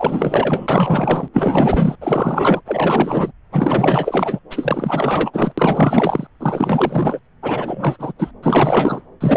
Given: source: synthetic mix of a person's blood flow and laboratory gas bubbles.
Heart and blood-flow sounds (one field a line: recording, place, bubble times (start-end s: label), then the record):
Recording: Doppler ultrasound of blood flow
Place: subclavian vein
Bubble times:
0.00-1.29 s: bubbles
1.33-1.95 s: bubbles
2.01-2.61 s: bubbles
2.66-3.31 s: bubbles
3.51-4.39 s: bubbles
4.50-5.30 s: bubbles
5.33-5.52 s: bubbles
5.58-6.27 s: bubbles
6.39-7.19 s: bubbles
7.42-8.12 s: bubbles
8.19-8.31 s: bubbles
8.43-9.07 s: bubbles
9.21-9.37 s: bubbles
From the record:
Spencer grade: 4 (maximum detectable bubble signal sounding continuously throughout systole and diastole of every cardiac period, and overriding the amplitude of the normal cardiac signals)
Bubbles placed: anywhere in the cardiac cycle